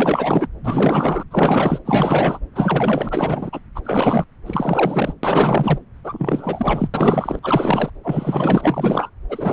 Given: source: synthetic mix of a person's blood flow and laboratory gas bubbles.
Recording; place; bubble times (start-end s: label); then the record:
Doppler ultrasound of blood flow; subclavian vein
0.00-0.48 s: bubbles
0.64-1.23 s: bubbles
1.31-1.79 s: bubbles
1.85-2.40 s: bubbles
2.55-3.60 s: bubbles
3.75-3.81 s: bubbles
3.84-4.25 s: bubbles
4.46-5.13 s: bubbles
5.23-5.78 s: bubbles
6.03-6.89 s: bubbles
6.93-7.39 s: bubbles
7.42-7.90 s: bubbles
8.03-9.10 s: bubbles
9.29-9.53 s: bubbles
From the record:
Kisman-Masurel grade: 444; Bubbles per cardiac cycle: continuous sound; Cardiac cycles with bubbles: 100%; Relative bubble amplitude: maximal (0.775 to 0.999); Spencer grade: 4 (maximum detectable bubble signal sounding continuously throughout systole and diastole of every cardiac period, and overriding the amplitude of the normal cardiac signals); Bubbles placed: anywhere in the cardiac cycle